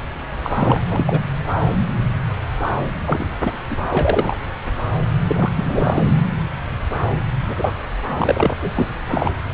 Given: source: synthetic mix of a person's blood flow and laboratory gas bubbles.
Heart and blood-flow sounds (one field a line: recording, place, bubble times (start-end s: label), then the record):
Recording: Doppler ultrasound of blood flow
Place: subclavian vein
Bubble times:
0.43-0.51 s: bubbles
0.56-0.80 s: bubbles
0.90-1.19 s: bubbles
3.05-3.26 s: bubbles
3.44-3.53 s: bubbles
3.70-3.76 s: bubbles
3.90-4.37 s: bubbles
5.27-5.51 s: bubbles
5.56-6.03 s: bubbles
7.47-7.74 s: bubbles
8.10-8.54 s: bubbles
8.62-8.71 s: bubbles
8.75-8.86 s: bubbles
9.08-9.31 s: bubbles
From the record:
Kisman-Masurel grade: 332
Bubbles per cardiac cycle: rolling drumbeat, 9 or more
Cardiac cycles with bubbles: 50 to 99%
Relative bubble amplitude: moderate (0.250 to 0.450)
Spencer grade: 3 (all of the cardiac periods contain showers or single bubble signals, but not dominating or overriding the cardiac motion signals)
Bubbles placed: anywhere in the cardiac cycle